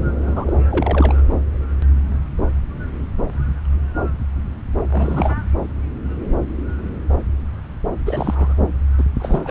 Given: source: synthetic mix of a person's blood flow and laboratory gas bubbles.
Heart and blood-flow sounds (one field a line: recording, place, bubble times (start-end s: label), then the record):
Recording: Doppler ultrasound of blood flow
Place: subclavian vein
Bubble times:
0.26-0.53 s: bubbles
0.71-1.15 s: bubbles
4.91-5.34 s: bubbles
8.05-8.54 s: bubbles
8.97-9.04 s: bubbles
9.19-9.50 s: bubbles
From the record:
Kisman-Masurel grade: 222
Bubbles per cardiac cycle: several, 3 to 8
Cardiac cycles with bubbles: 10 to 50%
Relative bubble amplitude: moderate (0.250 to 0.450)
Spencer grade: 2 (many but less than half of the cardiac periods contain bubble signals, singularly or in groups)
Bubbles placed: anywhere in the cardiac cycle